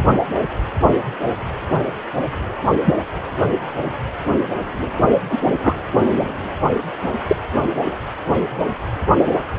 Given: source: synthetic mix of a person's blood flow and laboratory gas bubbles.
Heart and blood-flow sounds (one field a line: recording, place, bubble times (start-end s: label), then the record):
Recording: Doppler ultrasound of blood flow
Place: precordium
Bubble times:
2.85-2.94 s: bubbles
5.30-5.39 s: bubbles
5.64-5.74 s: bubbles
7.28-7.37 s: bubbles
From the record:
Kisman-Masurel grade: 123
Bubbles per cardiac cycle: 1 to 2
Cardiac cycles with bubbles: 10 to 50%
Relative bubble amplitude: loud (0.450 to 0.775)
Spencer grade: 2 (many but less than half of the cardiac periods contain bubble signals, singularly or in groups)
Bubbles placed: anywhere in the cardiac cycle